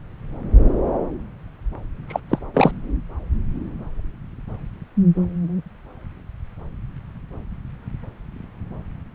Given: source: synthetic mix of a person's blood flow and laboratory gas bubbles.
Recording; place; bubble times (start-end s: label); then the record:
Doppler ultrasound of blood flow; subclavian vein
2.08-2.20 s: bubbles
2.29-2.39 s: bubbles
2.53-2.72 s: bubbles
From the record:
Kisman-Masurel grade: 213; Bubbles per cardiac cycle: several, 3 to 8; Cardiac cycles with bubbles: 1 to 10%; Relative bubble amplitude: loud (0.450 to 0.775); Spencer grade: 1 (occasional bubble signal discernible with the cardiac motion signal, with majority of cardiac periods free of bubbles); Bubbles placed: anywhere in the cardiac cycle